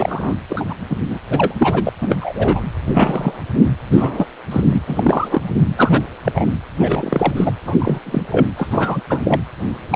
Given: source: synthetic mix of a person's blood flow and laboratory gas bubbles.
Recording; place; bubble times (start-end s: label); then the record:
Doppler ultrasound of blood flow; precordium
0.00-0.35 s: bubbles
0.49-0.65 s: bubbles
0.68-0.74 s: bubbles
0.89-0.96 s: bubbles
1.09-1.19 s: bubbles
1.29-1.55 s: bubbles
1.57-1.90 s: bubbles
2.02-2.15 s: bubbles
2.21-2.60 s: bubbles
2.94-3.42 s: bubbles
3.91-4.27 s: bubbles
4.51-4.81 s: bubbles
4.87-5.42 s: bubbles
5.76-6.01 s: bubbles
6.24-6.32 s: bubbles
6.35-6.48 s: bubbles
6.80-7.34 s: bubbles
7.37-7.52 s: bubbles
7.65-8.00 s: bubbles
8.05-8.22 s: bubbles
8.31-8.46 s: bubbles
8.57-9.02 s: bubbles
9.10-9.21 s: bubbles
9.25-9.41 s: bubbles
9.91-9.96 s: bubbles
From the record:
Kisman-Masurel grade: 233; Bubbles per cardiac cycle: several, 3 to 8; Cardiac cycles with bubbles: 50 to 99%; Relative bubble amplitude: loud (0.450 to 0.775); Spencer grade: 3 (all of the cardiac periods contain showers or single bubble signals, but not dominating or overriding the cardiac motion signals); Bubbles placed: anywhere in the cardiac cycle